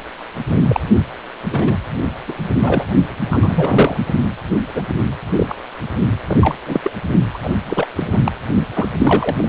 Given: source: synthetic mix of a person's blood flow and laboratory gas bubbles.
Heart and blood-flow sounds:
Doppler ultrasound of blood flow; precordium
0.49-0.57 s: bubbles
0.69-0.80 s: bubbles
1.50-1.76 s: bubbles
2.27-2.33 s: bubbles
2.62-2.85 s: bubbles
3.30-3.97 s: bubbles
4.74-4.83 s: bubbles
4.89-4.98 s: bubbles
5.36-5.55 s: bubbles
6.28-6.55 s: bubbles
6.65-6.91 s: bubbles
7.34-7.38 s: bubbles
7.43-7.54 s: bubbles
7.65-7.87 s: bubbles
7.96-8.08 s: bubbles
8.12-8.21 s: bubbles
8.24-8.32 s: bubbles
8.74-8.88 s: bubbles
8.91-9.48 s: bubbles
From the record:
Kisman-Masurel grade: 242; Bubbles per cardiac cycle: several, 3 to 8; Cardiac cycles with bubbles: 100%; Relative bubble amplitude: moderate (0.250 to 0.450); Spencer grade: 3 (all of the cardiac periods contain showers or single bubble signals, but not dominating or overriding the cardiac motion signals); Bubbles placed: only in the low amplitude regions of the cardiac cycle

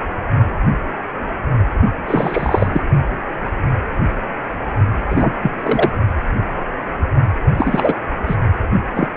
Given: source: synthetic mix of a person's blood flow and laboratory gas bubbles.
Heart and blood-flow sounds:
Doppler ultrasound of blood flow; precordium
2.07-2.83 s: bubbles
5.09-5.33 s: bubbles
5.40-5.52 s: bubbles
5.62-5.91 s: bubbles
7.58-7.94 s: bubbles
8.27-8.36 s: bubbles
8.94-9.08 s: bubbles
From the record:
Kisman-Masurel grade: 233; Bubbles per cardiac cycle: several, 3 to 8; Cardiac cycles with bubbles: 50 to 99%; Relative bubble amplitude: loud (0.450 to 0.775); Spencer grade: 3 (all of the cardiac periods contain showers or single bubble signals, but not dominating or overriding the cardiac motion signals); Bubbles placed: only in the low amplitude regions of the cardiac cycle

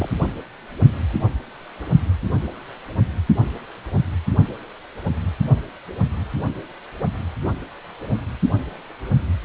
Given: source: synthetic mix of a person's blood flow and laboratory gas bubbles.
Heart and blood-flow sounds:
Doppler ultrasound of blood flow; precordium
0.00-0.09 s: bubbles
From the record:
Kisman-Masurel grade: 121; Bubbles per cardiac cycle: 1 to 2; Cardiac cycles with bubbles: 10 to 50%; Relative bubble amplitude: barely perceptible (0.100 to 0.250); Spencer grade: 2 (many but less than half of the cardiac periods contain bubble signals, singularly or in groups); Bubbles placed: only in the low amplitude regions of the cardiac cycle

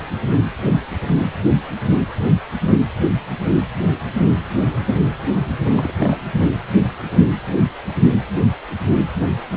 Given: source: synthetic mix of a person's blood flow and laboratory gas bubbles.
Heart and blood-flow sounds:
Doppler ultrasound of blood flow; precordium
5.72-5.92 s: bubbles
6.00-6.17 s: bubbles
From the record:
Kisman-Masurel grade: 211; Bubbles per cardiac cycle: several, 3 to 8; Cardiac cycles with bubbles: 1 to 10%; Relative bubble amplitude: barely perceptible (0.100 to 0.250); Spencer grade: 1 (occasional bubble signal discernible with the cardiac motion signal, with majority of cardiac periods free of bubbles); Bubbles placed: anywhere in the cardiac cycle

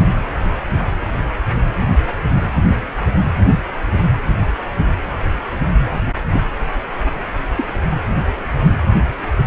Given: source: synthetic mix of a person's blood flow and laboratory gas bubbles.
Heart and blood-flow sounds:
Doppler ultrasound of blood flow; precordium
6.32-6.43 s: bubbles
7.57-7.66 s: bubbles
From the record:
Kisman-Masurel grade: 123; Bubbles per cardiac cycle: 1 to 2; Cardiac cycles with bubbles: 10 to 50%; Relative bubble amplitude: loud (0.450 to 0.775); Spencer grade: 2 (many but less than half of the cardiac periods contain bubble signals, singularly or in groups); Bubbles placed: anywhere in the cardiac cycle

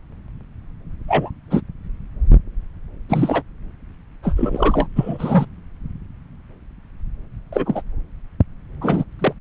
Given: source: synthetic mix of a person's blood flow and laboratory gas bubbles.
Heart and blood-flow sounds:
Doppler ultrasound of blood flow; subclavian vein
1.07-1.30 s: bubbles
1.50-1.61 s: bubbles
3.09-3.42 s: bubbles
4.22-4.88 s: bubbles
4.96-5.46 s: bubbles
7.52-7.82 s: bubbles
8.81-9.04 s: bubbles
9.19-9.33 s: bubbles
From the record:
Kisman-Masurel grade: 223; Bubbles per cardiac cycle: several, 3 to 8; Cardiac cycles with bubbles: 10 to 50%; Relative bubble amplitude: loud (0.450 to 0.775); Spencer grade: 2 (many but less than half of the cardiac periods contain bubble signals, singularly or in groups); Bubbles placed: anywhere in the cardiac cycle

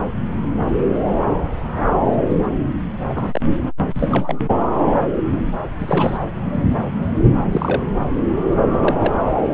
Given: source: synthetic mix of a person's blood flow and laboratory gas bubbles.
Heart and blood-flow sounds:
Doppler ultrasound of blood flow; subclavian vein
3.09-3.41 s: bubbles
3.93-4.42 s: bubbles
5.79-6.25 s: bubbles
7.51-7.85 s: bubbles
8.69-9.12 s: bubbles
From the record:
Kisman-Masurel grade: 222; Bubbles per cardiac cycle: several, 3 to 8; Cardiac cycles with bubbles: 10 to 50%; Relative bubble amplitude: moderate (0.250 to 0.450); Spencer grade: 2 (many but less than half of the cardiac periods contain bubble signals, singularly or in groups); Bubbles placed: anywhere in the cardiac cycle

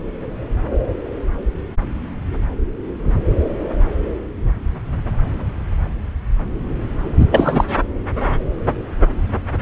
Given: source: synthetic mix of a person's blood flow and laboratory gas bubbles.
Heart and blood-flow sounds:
Doppler ultrasound of blood flow; subclavian vein
7.19-7.25 s: bubbles
7.31-7.64 s: bubbles
From the record:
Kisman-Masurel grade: 213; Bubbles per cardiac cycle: several, 3 to 8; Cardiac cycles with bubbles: 1 to 10%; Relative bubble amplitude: loud (0.450 to 0.775); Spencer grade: 1 (occasional bubble signal discernible with the cardiac motion signal, with majority of cardiac periods free of bubbles); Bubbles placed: anywhere in the cardiac cycle

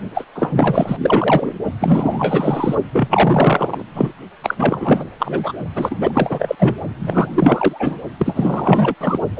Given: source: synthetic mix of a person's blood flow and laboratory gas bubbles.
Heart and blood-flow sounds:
Doppler ultrasound of blood flow; precordium
0.14-0.24 s: bubbles
0.35-0.96 s: bubbles
0.99-1.55 s: bubbles
1.80-2.75 s: bubbles
2.92-3.84 s: bubbles
3.94-4.12 s: bubbles
4.43-4.54 s: bubbles
4.58-5.05 s: bubbles
5.19-5.53 s: bubbles
5.75-5.96 s: bubbles
6.00-6.55 s: bubbles
6.59-6.75 s: bubbles
6.99-7.99 s: bubbles
8.19-8.95 s: bubbles
9.01-9.20 s: bubbles
9.37-9.40 s: bubbles
From the record:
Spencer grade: 4 (maximum detectable bubble signal sounding continuously throughout systole and diastole of every cardiac period, and overriding the amplitude of the normal cardiac signals); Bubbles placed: only in the low amplitude regions of the cardiac cycle

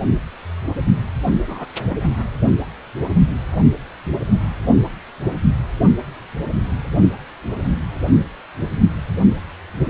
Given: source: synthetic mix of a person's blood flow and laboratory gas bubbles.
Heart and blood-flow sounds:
Doppler ultrasound of blood flow; precordium
1.26-1.31 s: bubbles
1.47-1.66 s: bubbles
1.89-1.98 s: bubbles
2.02-2.10 s: bubbles
From the record:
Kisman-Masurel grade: 211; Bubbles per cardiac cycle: several, 3 to 8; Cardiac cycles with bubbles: 1 to 10%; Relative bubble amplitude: barely perceptible (0.100 to 0.250); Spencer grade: 1 (occasional bubble signal discernible with the cardiac motion signal, with majority of cardiac periods free of bubbles); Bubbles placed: anywhere in the cardiac cycle

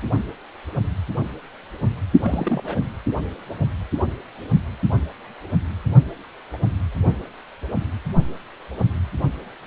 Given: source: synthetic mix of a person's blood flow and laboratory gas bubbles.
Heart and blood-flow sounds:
Doppler ultrasound of blood flow; precordium
2.22-2.84 s: bubbles
From the record:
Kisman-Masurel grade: 211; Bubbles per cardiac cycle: several, 3 to 8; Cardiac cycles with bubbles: 1 to 10%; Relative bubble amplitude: barely perceptible (0.100 to 0.250); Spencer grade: 1 (occasional bubble signal discernible with the cardiac motion signal, with majority of cardiac periods free of bubbles); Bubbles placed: only in the low amplitude regions of the cardiac cycle

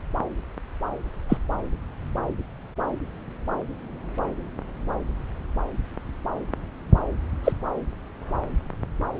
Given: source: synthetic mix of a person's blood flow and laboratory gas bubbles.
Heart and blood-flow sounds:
Doppler ultrasound of blood flow; subclavian vein
1.29-1.37 s: bubbles
7.44-7.52 s: bubbles
From the record:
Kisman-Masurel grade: 113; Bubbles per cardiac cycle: 1 to 2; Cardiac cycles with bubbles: 1 to 10%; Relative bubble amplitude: loud (0.450 to 0.775); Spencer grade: 1 (occasional bubble signal discernible with the cardiac motion signal, with majority of cardiac periods free of bubbles); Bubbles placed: anywhere in the cardiac cycle

